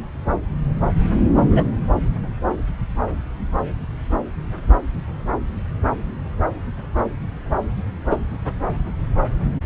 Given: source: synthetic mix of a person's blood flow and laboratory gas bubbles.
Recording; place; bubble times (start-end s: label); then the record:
Doppler ultrasound of blood flow; subclavian vein
1.38-1.69 s: bubbles
8.11-8.16 s: bubbles
From the record:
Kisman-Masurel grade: 113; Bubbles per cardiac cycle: 1 to 2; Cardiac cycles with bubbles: 1 to 10%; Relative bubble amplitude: loud (0.450 to 0.775); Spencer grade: 1 (occasional bubble signal discernible with the cardiac motion signal, with majority of cardiac periods free of bubbles); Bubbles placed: anywhere in the cardiac cycle